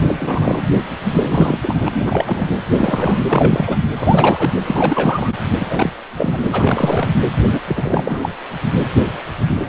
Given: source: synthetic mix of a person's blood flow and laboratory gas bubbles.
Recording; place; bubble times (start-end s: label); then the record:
Doppler ultrasound of blood flow; precordium
0.00-0.68 s: bubbles
1.12-1.59 s: bubbles
1.62-2.53 s: bubbles
2.70-3.19 s: bubbles
3.29-3.78 s: bubbles
3.97-4.50 s: bubbles
4.65-5.33 s: bubbles
5.60-5.90 s: bubbles
6.16-7.09 s: bubbles
7.48-7.60 s: bubbles
7.68-8.29 s: bubbles
From the record:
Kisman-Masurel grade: 333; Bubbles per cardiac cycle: rolling drumbeat, 9 or more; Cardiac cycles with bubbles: 50 to 99%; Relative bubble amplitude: loud (0.450 to 0.775); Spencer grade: 3 (all of the cardiac periods contain showers or single bubble signals, but not dominating or overriding the cardiac motion signals); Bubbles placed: anywhere in the cardiac cycle